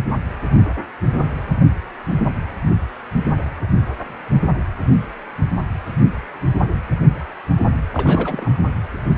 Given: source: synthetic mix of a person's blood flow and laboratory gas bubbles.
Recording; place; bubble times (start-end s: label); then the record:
Doppler ultrasound of blood flow; precordium
7.93-8.51 s: bubbles
From the record:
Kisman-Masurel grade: 212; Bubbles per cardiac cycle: several, 3 to 8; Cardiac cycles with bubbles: 1 to 10%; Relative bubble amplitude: moderate (0.250 to 0.450); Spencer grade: 1 (occasional bubble signal discernible with the cardiac motion signal, with majority of cardiac periods free of bubbles); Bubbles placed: anywhere in the cardiac cycle